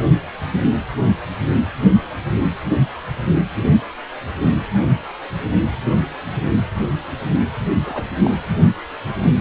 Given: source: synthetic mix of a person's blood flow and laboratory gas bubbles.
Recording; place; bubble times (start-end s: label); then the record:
Doppler ultrasound of blood flow; precordium
7.86-8.03 s: bubbles
8.24-8.36 s: bubbles
From the record:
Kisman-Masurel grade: 212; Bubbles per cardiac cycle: several, 3 to 8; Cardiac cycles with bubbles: 1 to 10%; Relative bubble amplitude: moderate (0.250 to 0.450); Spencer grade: 1 (occasional bubble signal discernible with the cardiac motion signal, with majority of cardiac periods free of bubbles); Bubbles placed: anywhere in the cardiac cycle